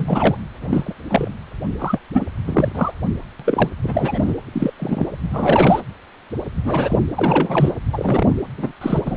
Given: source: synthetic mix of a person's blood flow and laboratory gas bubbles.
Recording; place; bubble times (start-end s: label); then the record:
Doppler ultrasound of blood flow; precordium
0.00-0.40 s: bubbles
0.61-0.93 s: bubbles
1.09-1.33 s: bubbles
1.79-1.99 s: bubbles
2.14-2.25 s: bubbles
2.47-2.72 s: bubbles
2.75-2.92 s: bubbles
3.40-3.69 s: bubbles
3.83-4.33 s: bubbles
4.52-4.72 s: bubbles
4.78-5.07 s: bubbles
5.29-5.80 s: bubbles
6.64-6.99 s: bubbles
7.14-7.74 s: bubbles
7.92-8.34 s: bubbles
8.57-8.71 s: bubbles
8.81-9.17 s: bubbles
From the record:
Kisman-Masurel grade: 232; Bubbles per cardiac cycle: several, 3 to 8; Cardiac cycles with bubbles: 50 to 99%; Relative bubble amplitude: moderate (0.250 to 0.450); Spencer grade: 3 (all of the cardiac periods contain showers or single bubble signals, but not dominating or overriding the cardiac motion signals); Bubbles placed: anywhere in the cardiac cycle